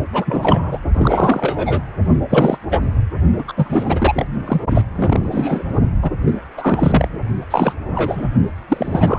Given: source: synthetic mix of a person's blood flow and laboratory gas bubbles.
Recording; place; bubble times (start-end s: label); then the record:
Doppler ultrasound of blood flow; precordium
0.12-0.79 s: bubbles
0.93-1.81 s: bubbles
2.29-2.58 s: bubbles
2.71-2.79 s: bubbles
3.36-3.44 s: bubbles
3.48-3.53 s: bubbles
3.56-4.25 s: bubbles
4.46-4.61 s: bubbles
4.70-4.82 s: bubbles
4.95-5.64 s: bubbles
6.01-6.11 s: bubbles
6.25-6.33 s: bubbles
6.57-7.08 s: bubbles
7.50-7.73 s: bubbles
7.87-8.29 s: bubbles
8.69-9.19 s: bubbles
From the record:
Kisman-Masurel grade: 343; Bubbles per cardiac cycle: rolling drumbeat, 9 or more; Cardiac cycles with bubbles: 100%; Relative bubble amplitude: loud (0.450 to 0.775); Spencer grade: 3 (all of the cardiac periods contain showers or single bubble signals, but not dominating or overriding the cardiac motion signals); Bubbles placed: only in the low amplitude regions of the cardiac cycle